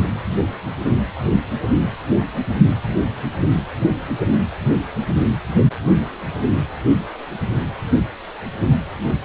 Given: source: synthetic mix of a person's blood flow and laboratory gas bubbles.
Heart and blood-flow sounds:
Doppler ultrasound of blood flow; precordium
0.00-0.09 s: bubbles
From the record:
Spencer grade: 1 (occasional bubble signal discernible with the cardiac motion signal, with majority of cardiac periods free of bubbles); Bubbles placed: only in the low amplitude regions of the cardiac cycle

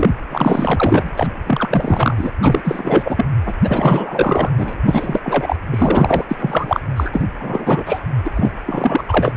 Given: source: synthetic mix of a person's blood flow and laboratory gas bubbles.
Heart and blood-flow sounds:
Doppler ultrasound of blood flow; precordium
0.00-0.10 s: bubbles
0.31-1.27 s: bubbles
1.46-2.14 s: bubbles
2.17-2.31 s: bubbles
2.42-3.25 s: bubbles
3.46-3.55 s: bubbles
3.63-4.51 s: bubbles
4.58-4.80 s: bubbles
4.86-5.21 s: bubbles
5.23-5.56 s: bubbles
5.71-6.25 s: bubbles
6.28-6.80 s: bubbles
6.96-7.28 s: bubbles
7.40-8.00 s: bubbles
8.25-8.29 s: bubbles
8.35-8.52 s: bubbles
8.66-9.03 s: bubbles
9.09-9.32 s: bubbles
From the record:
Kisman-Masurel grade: 444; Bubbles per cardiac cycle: continuous sound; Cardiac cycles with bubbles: 100%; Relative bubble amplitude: maximal (0.775 to 0.999); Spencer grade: 4 (maximum detectable bubble signal sounding continuously throughout systole and diastole of every cardiac period, and overriding the amplitude of the normal cardiac signals); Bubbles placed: anywhere in the cardiac cycle

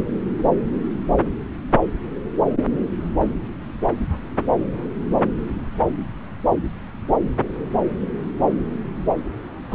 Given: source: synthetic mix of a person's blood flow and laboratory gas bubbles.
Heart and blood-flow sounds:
Doppler ultrasound of blood flow; subclavian vein
9.71-9.75 s: bubbles
From the record:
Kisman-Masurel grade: 213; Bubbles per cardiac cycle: several, 3 to 8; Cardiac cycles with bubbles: 1 to 10%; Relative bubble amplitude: loud (0.450 to 0.775); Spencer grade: 1 (occasional bubble signal discernible with the cardiac motion signal, with majority of cardiac periods free of bubbles); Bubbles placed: anywhere in the cardiac cycle

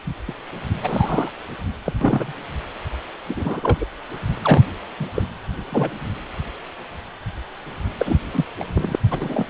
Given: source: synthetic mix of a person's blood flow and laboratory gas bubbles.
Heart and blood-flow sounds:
Doppler ultrasound of blood flow; precordium
0.28-0.34 s: bubbles
0.82-1.29 s: bubbles
1.85-1.94 s: bubbles
2.01-2.32 s: bubbles
3.28-3.86 s: bubbles
4.42-4.63 s: bubbles
5.00-5.06 s: bubbles
5.14-5.22 s: bubbles
5.58-5.62 s: bubbles
5.71-5.93 s: bubbles
7.99-8.17 s: bubbles
8.33-8.45 s: bubbles
8.60-8.65 s: bubbles
8.74-8.96 s: bubbles
9.11-9.46 s: bubbles
From the record:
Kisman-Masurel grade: 232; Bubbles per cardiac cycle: several, 3 to 8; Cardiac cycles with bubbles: 50 to 99%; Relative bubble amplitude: moderate (0.250 to 0.450); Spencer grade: 3 (all of the cardiac periods contain showers or single bubble signals, but not dominating or overriding the cardiac motion signals); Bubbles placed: anywhere in the cardiac cycle

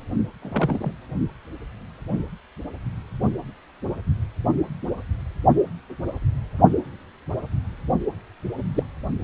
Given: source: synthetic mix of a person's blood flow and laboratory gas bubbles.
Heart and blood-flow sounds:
Doppler ultrasound of blood flow; precordium
0.41-0.92 s: bubbles
2.07-2.24 s: bubbles
8.74-8.83 s: bubbles
From the record:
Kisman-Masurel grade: 122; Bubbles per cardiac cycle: 1 to 2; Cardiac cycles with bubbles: 10 to 50%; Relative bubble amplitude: moderate (0.250 to 0.450); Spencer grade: 2 (many but less than half of the cardiac periods contain bubble signals, singularly or in groups); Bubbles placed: only in the low amplitude regions of the cardiac cycle

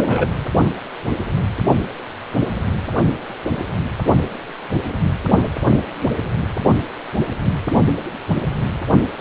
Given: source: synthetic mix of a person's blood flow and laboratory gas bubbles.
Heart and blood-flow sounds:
Doppler ultrasound of blood flow; precordium
0.00-0.27 s: bubbles
From the record:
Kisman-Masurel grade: 113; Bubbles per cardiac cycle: 1 to 2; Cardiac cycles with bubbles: 1 to 10%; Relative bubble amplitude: loud (0.450 to 0.775); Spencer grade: 1 (occasional bubble signal discernible with the cardiac motion signal, with majority of cardiac periods free of bubbles); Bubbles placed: only in the low amplitude regions of the cardiac cycle

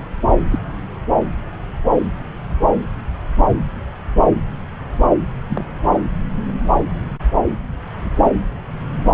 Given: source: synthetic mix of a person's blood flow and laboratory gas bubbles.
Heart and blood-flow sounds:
Doppler ultrasound of blood flow; subclavian vein
0.51-0.59 s: bubbles
5.49-5.64 s: bubbles
From the record:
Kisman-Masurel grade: 122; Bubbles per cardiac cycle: 1 to 2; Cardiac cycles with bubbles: 10 to 50%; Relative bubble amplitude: moderate (0.250 to 0.450); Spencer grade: 2 (many but less than half of the cardiac periods contain bubble signals, singularly or in groups); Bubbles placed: anywhere in the cardiac cycle

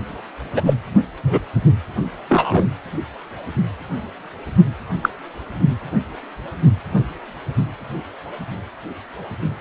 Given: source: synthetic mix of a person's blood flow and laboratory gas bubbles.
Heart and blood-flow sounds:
Doppler ultrasound of blood flow; precordium
0.56-0.61 s: bubbles
0.66-0.74 s: bubbles
1.23-1.41 s: bubbles
2.29-2.64 s: bubbles
5.02-5.09 s: bubbles
From the record:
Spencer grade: 2 (many but less than half of the cardiac periods contain bubble signals, singularly or in groups); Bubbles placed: only in the low amplitude regions of the cardiac cycle

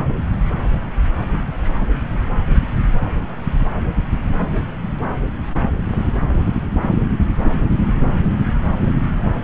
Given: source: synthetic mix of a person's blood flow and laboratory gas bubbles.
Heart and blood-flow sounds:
Doppler ultrasound of blood flow; subclavian vein
no bubbles
From the record:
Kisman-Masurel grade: 000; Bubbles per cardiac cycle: 0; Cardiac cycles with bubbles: 0%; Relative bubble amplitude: no bubbles discernible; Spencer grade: 0 (complete lack of bubble signals)

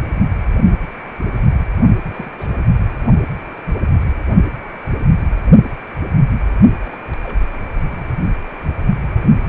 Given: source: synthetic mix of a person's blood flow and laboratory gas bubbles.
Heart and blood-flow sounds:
Doppler ultrasound of blood flow; precordium
2.08-2.33 s: bubbles
2.37-2.49 s: bubbles
6.82-6.98 s: bubbles
7.23-7.40 s: bubbles
9.16-9.49 s: bubbles
From the record:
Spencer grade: 2 (many but less than half of the cardiac periods contain bubble signals, singularly or in groups); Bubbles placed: only in the low amplitude regions of the cardiac cycle

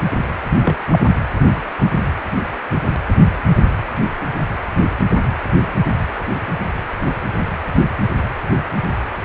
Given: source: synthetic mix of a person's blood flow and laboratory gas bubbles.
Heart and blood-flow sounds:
Doppler ultrasound of blood flow; precordium
0.63-0.77 s: bubbles
0.91-0.99 s: bubbles
From the record:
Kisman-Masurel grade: 113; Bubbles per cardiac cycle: 1 to 2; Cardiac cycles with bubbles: 1 to 10%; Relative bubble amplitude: loud (0.450 to 0.775); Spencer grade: 1 (occasional bubble signal discernible with the cardiac motion signal, with majority of cardiac periods free of bubbles); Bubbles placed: anywhere in the cardiac cycle

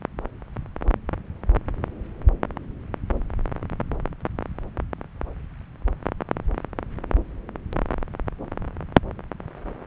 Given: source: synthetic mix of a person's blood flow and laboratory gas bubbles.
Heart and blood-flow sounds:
Doppler ultrasound of blood flow; subclavian vein
no bubbles
From the record:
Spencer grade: 0 (complete lack of bubble signals)

